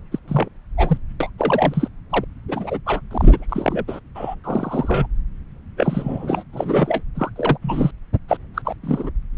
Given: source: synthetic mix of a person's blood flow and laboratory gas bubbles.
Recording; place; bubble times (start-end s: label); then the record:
Doppler ultrasound of blood flow; subclavian vein
0.12-0.19 s: bubbles
0.28-0.48 s: bubbles
0.77-0.97 s: bubbles
1.20-1.29 s: bubbles
1.39-1.88 s: bubbles
2.09-2.25 s: bubbles
2.48-2.78 s: bubbles
2.86-3.01 s: bubbles
3.10-3.46 s: bubbles
3.48-3.85 s: bubbles
3.88-4.00 s: bubbles
4.15-4.35 s: bubbles
4.44-5.07 s: bubbles
5.77-6.44 s: bubbles
6.53-7.03 s: bubbles
7.15-7.30 s: bubbles
7.36-7.58 s: bubbles
7.62-7.91 s: bubbles
8.28-8.37 s: bubbles
8.54-8.62 s: bubbles
8.64-8.75 s: bubbles
8.83-9.10 s: bubbles
From the record:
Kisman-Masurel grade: 242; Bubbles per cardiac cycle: several, 3 to 8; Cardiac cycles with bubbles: 100%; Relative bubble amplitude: moderate (0.250 to 0.450); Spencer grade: 3 (all of the cardiac periods contain showers or single bubble signals, but not dominating or overriding the cardiac motion signals); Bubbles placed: anywhere in the cardiac cycle